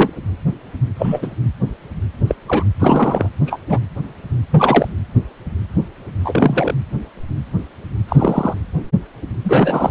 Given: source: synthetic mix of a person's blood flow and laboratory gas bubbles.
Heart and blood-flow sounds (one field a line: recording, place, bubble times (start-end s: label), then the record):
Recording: Doppler ultrasound of blood flow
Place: precordium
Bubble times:
0.00-0.11 s: bubbles
0.95-1.32 s: bubbles
2.27-2.35 s: bubbles
2.46-2.64 s: bubbles
2.80-3.29 s: bubbles
3.46-3.59 s: bubbles
3.69-3.79 s: bubbles
4.51-4.88 s: bubbles
6.24-6.75 s: bubbles
8.09-8.54 s: bubbles
9.44-9.90 s: bubbles
From the record:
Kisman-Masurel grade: 223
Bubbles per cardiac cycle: several, 3 to 8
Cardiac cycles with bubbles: 10 to 50%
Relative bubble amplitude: loud (0.450 to 0.775)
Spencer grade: 2 (many but less than half of the cardiac periods contain bubble signals, singularly or in groups)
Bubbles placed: anywhere in the cardiac cycle